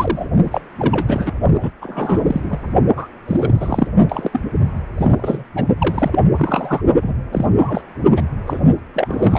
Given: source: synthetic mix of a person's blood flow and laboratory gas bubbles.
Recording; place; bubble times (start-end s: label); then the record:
Doppler ultrasound of blood flow; precordium
0.00-0.28 s: bubbles
0.44-0.60 s: bubbles
0.79-1.33 s: bubbles
1.60-1.70 s: bubbles
1.81-2.58 s: bubbles
2.96-3.07 s: bubbles
3.27-3.87 s: bubbles
4.09-4.29 s: bubbles
4.32-4.39 s: bubbles
4.97-5.44 s: bubbles
5.55-5.64 s: bubbles
5.78-6.22 s: bubbles
6.36-6.81 s: bubbles
7.02-7.14 s: bubbles
7.32-7.46 s: bubbles
7.56-7.81 s: bubbles
8.16-8.23 s: bubbles
8.46-8.61 s: bubbles
8.94-9.39 s: bubbles
From the record:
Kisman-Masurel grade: 342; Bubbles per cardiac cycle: rolling drumbeat, 9 or more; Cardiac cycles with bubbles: 100%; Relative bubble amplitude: moderate (0.250 to 0.450); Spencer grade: 3 (all of the cardiac periods contain showers or single bubble signals, but not dominating or overriding the cardiac motion signals); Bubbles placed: only in the low amplitude regions of the cardiac cycle